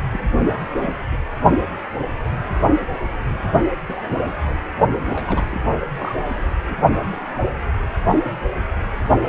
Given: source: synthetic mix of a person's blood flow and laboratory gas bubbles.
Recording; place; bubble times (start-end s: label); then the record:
Doppler ultrasound of blood flow; precordium
0.11-0.25 s: bubbles
0.44-0.57 s: bubbles
0.82-0.99 s: bubbles
1.11-1.16 s: bubbles
3.88-4.22 s: bubbles
4.32-4.34 s: bubbles
4.46-4.59 s: bubbles
5.04-5.59 s: bubbles
5.96-6.16 s: bubbles
6.64-6.77 s: bubbles
From the record:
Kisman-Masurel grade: 221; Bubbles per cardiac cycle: several, 3 to 8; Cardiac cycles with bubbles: 10 to 50%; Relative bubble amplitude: barely perceptible (0.100 to 0.250); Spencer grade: 2 (many but less than half of the cardiac periods contain bubble signals, singularly or in groups); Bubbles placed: anywhere in the cardiac cycle